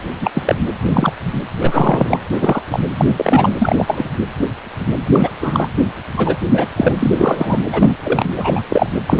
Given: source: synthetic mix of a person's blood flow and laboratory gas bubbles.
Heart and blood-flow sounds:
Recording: Doppler ultrasound of blood flow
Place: precordium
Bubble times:
0.20-0.31 s: bubbles
0.34-0.55 s: bubbles
0.82-1.12 s: bubbles
1.60-2.18 s: bubbles
2.32-2.62 s: bubbles
2.71-2.79 s: bubbles
2.97-3.05 s: bubbles
3.17-3.54 s: bubbles
3.58-4.08 s: bubbles
5.04-5.35 s: bubbles
5.41-5.68 s: bubbles
6.16-6.37 s: bubbles
6.54-6.70 s: bubbles
6.76-6.93 s: bubbles
6.99-7.59 s: bubbles
7.72-7.95 s: bubbles
8.04-8.29 s: bubbles
8.36-8.62 s: bubbles
8.70-8.91 s: bubbles
9.06-9.20 s: bubbles
From the record:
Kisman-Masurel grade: 233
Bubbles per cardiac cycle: several, 3 to 8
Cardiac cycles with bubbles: 50 to 99%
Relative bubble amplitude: loud (0.450 to 0.775)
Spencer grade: 3 (all of the cardiac periods contain showers or single bubble signals, but not dominating or overriding the cardiac motion signals)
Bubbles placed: anywhere in the cardiac cycle

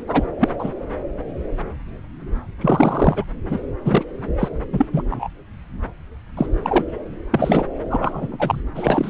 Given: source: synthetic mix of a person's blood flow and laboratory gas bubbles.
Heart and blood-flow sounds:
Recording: Doppler ultrasound of blood flow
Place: subclavian vein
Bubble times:
0.07-0.24 s: bubbles
0.39-0.49 s: bubbles
0.59-0.72 s: bubbles
2.61-3.25 s: bubbles
3.48-3.58 s: bubbles
3.85-4.05 s: bubbles
4.38-4.49 s: bubbles
4.72-4.86 s: bubbles
4.92-5.03 s: bubbles
5.10-5.29 s: bubbles
6.37-6.46 s: bubbles
6.62-6.84 s: bubbles
7.32-7.67 s: bubbles
7.89-8.61 s: bubbles
8.74-9.10 s: bubbles
From the record:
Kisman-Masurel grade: 233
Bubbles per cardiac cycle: several, 3 to 8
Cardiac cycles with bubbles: 50 to 99%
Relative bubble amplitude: loud (0.450 to 0.775)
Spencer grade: 3 (all of the cardiac periods contain showers or single bubble signals, but not dominating or overriding the cardiac motion signals)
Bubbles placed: anywhere in the cardiac cycle

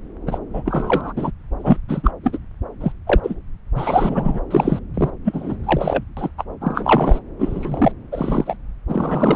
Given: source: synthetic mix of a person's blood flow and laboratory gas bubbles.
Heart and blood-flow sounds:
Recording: Doppler ultrasound of blood flow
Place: subclavian vein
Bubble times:
0.26-0.38 s: bubbles
0.53-1.13 s: bubbles
1.16-1.31 s: bubbles
1.58-1.81 s: bubbles
1.88-2.11 s: bubbles
2.23-2.38 s: bubbles
2.81-2.92 s: bubbles
3.06-3.20 s: bubbles
3.23-3.35 s: bubbles
3.76-4.39 s: bubbles
4.50-4.79 s: bubbles
4.94-5.10 s: bubbles
5.24-5.58 s: bubbles
5.63-6.03 s: bubbles
6.17-6.30 s: bubbles
6.38-6.44 s: bubbles
6.60-7.19 s: bubbles
7.39-7.92 s: bubbles
8.12-8.57 s: bubbles
8.88-9.36 s: bubbles
From the record:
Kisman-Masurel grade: 343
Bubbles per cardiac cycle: rolling drumbeat, 9 or more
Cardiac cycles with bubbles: 100%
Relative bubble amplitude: loud (0.450 to 0.775)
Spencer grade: 3 (all of the cardiac periods contain showers or single bubble signals, but not dominating or overriding the cardiac motion signals)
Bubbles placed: anywhere in the cardiac cycle

